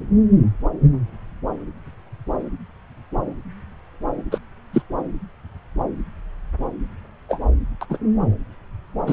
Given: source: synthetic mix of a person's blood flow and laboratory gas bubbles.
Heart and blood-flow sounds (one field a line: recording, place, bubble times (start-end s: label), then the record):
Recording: Doppler ultrasound of blood flow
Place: subclavian vein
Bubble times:
4.32-4.38 s: bubbles
4.73-4.82 s: bubbles
7.29-7.39 s: bubbles
7.81-7.86 s: bubbles
7.89-7.97 s: bubbles
9.06-9.13 s: bubbles
From the record:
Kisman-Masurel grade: 123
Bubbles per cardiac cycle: 1 to 2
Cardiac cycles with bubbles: 10 to 50%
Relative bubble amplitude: loud (0.450 to 0.775)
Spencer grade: 2 (many but less than half of the cardiac periods contain bubble signals, singularly or in groups)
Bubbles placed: anywhere in the cardiac cycle